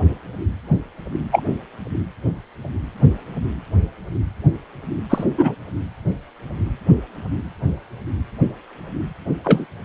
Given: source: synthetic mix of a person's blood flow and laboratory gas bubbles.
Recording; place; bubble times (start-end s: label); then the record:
Doppler ultrasound of blood flow; precordium
1.31-1.43 s: bubbles
5.09-5.24 s: bubbles
5.37-5.55 s: bubbles
9.44-9.66 s: bubbles
From the record:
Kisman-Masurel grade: 123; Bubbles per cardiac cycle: 1 to 2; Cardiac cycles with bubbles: 10 to 50%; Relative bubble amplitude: loud (0.450 to 0.775); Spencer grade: 2 (many but less than half of the cardiac periods contain bubble signals, singularly or in groups); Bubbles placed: only in the low amplitude regions of the cardiac cycle